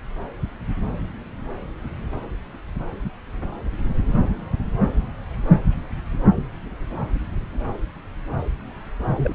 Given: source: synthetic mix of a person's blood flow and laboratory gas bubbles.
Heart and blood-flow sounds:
Doppler ultrasound of blood flow; subclavian vein
9.16-9.34 s: bubbles
From the record:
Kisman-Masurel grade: 211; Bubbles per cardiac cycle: several, 3 to 8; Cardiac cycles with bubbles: 1 to 10%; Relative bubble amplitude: barely perceptible (0.100 to 0.250); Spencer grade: 1 (occasional bubble signal discernible with the cardiac motion signal, with majority of cardiac periods free of bubbles); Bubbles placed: anywhere in the cardiac cycle

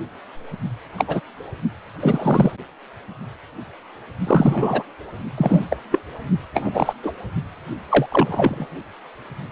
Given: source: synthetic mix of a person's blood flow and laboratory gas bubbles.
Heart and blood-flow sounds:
Doppler ultrasound of blood flow; precordium
0.98-1.05 s: bubbles
1.08-1.21 s: bubbles
2.00-2.52 s: bubbles
4.27-4.83 s: bubbles
5.37-5.65 s: bubbles
5.70-5.77 s: bubbles
5.91-5.99 s: bubbles
6.54-6.93 s: bubbles
7.03-7.12 s: bubbles
7.89-8.06 s: bubbles
8.11-8.67 s: bubbles
From the record:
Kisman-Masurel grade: 233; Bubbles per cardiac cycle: several, 3 to 8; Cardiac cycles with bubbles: 50 to 99%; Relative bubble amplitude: loud (0.450 to 0.775); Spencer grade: 3 (all of the cardiac periods contain showers or single bubble signals, but not dominating or overriding the cardiac motion signals); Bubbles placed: only in the low amplitude regions of the cardiac cycle

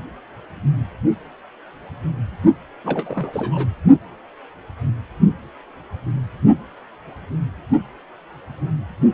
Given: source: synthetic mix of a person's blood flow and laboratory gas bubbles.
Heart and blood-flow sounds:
Doppler ultrasound of blood flow; precordium
2.84-3.69 s: bubbles
From the record:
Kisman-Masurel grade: 221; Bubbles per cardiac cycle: several, 3 to 8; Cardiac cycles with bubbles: 10 to 50%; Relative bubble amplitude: barely perceptible (0.100 to 0.250); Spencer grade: 2 (many but less than half of the cardiac periods contain bubble signals, singularly or in groups); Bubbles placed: only in the low amplitude regions of the cardiac cycle

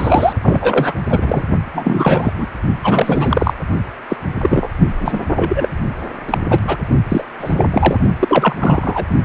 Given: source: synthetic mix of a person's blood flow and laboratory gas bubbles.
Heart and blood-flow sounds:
Doppler ultrasound of blood flow; precordium
0.00-0.33 s: bubbles
0.43-0.94 s: bubbles
1.08-1.43 s: bubbles
1.74-2.33 s: bubbles
2.38-2.46 s: bubbles
2.83-3.54 s: bubbles
4.09-4.17 s: bubbles
4.41-4.69 s: bubbles
4.78-4.88 s: bubbles
4.97-5.21 s: bubbles
5.36-5.69 s: bubbles
6.28-6.38 s: bubbles
6.50-6.58 s: bubbles
6.67-6.77 s: bubbles
7.08-7.23 s: bubbles
7.39-7.67 s: bubbles
7.71-7.97 s: bubbles
8.19-8.56 s: bubbles
8.59-9.06 s: bubbles
From the record:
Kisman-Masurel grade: 343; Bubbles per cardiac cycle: rolling drumbeat, 9 or more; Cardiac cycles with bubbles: 100%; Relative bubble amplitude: loud (0.450 to 0.775); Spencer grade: 3 (all of the cardiac periods contain showers or single bubble signals, but not dominating or overriding the cardiac motion signals); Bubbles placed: only in the low amplitude regions of the cardiac cycle

